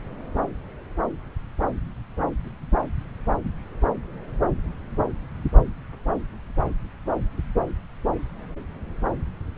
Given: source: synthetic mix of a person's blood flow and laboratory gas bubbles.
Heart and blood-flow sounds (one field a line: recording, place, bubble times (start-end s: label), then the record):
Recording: Doppler ultrasound of blood flow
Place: subclavian vein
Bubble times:
no bubbles
From the record:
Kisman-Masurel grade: 000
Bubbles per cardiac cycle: 0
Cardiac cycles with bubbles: 0%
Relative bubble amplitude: no bubbles discernible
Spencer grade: 0 (complete lack of bubble signals)